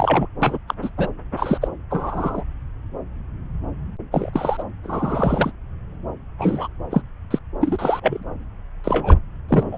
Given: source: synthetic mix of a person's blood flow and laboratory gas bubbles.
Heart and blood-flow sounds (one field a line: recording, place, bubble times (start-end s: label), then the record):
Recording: Doppler ultrasound of blood flow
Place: subclavian vein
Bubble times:
0.00-0.27 s: bubbles
0.42-0.58 s: bubbles
0.68-0.74 s: bubbles
0.82-0.89 s: bubbles
0.97-1.08 s: bubbles
1.36-1.58 s: bubbles
1.61-1.68 s: bubbles
1.90-2.45 s: bubbles
4.11-4.30 s: bubbles
4.33-4.63 s: bubbles
4.83-5.52 s: bubbles
6.38-6.67 s: bubbles
6.90-7.01 s: bubbles
7.30-7.39 s: bubbles
7.61-8.24 s: bubbles
8.84-9.19 s: bubbles
9.49-9.78 s: bubbles
From the record:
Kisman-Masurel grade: 233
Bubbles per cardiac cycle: several, 3 to 8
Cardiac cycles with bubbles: 50 to 99%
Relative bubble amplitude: loud (0.450 to 0.775)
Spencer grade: 3 (all of the cardiac periods contain showers or single bubble signals, but not dominating or overriding the cardiac motion signals)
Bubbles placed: anywhere in the cardiac cycle